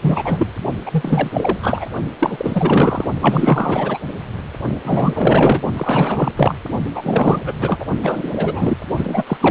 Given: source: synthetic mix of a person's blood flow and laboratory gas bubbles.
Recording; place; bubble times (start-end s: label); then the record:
Doppler ultrasound of blood flow; precordium
0.02-0.52 s: bubbles
0.85-1.58 s: bubbles
1.62-1.87 s: bubbles
2.19-3.05 s: bubbles
3.21-3.98 s: bubbles
4.84-5.62 s: bubbles
5.74-6.32 s: bubbles
6.35-6.55 s: bubbles
6.94-7.42 s: bubbles
7.45-7.54 s: bubbles
7.60-7.85 s: bubbles
8.01-8.78 s: bubbles
8.96-9.23 s: bubbles
9.27-9.38 s: bubbles
9.41-9.51 s: bubbles
From the record:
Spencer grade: 4 (maximum detectable bubble signal sounding continuously throughout systole and diastole of every cardiac period, and overriding the amplitude of the normal cardiac signals); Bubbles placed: only in the low amplitude regions of the cardiac cycle